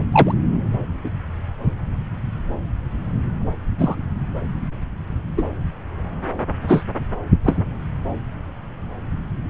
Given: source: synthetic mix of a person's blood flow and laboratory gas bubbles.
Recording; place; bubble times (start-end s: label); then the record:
Doppler ultrasound of blood flow; subclavian vein
0.12-0.34 s: bubbles
1.04-1.09 s: bubbles
3.79-3.96 s: bubbles
5.37-5.44 s: bubbles
6.67-6.83 s: bubbles
7.44-7.62 s: bubbles
From the record:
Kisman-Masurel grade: 123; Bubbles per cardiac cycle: 1 to 2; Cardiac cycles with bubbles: 10 to 50%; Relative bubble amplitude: loud (0.450 to 0.775); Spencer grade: 2 (many but less than half of the cardiac periods contain bubble signals, singularly or in groups); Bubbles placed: anywhere in the cardiac cycle